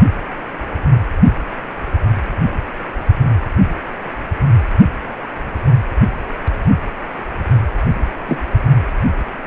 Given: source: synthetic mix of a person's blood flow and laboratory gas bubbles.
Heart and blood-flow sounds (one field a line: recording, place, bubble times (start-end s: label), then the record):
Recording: Doppler ultrasound of blood flow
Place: precordium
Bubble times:
8.27-8.38 s: bubbles
From the record:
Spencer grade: 2 (many but less than half of the cardiac periods contain bubble signals, singularly or in groups)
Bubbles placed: only in the low amplitude regions of the cardiac cycle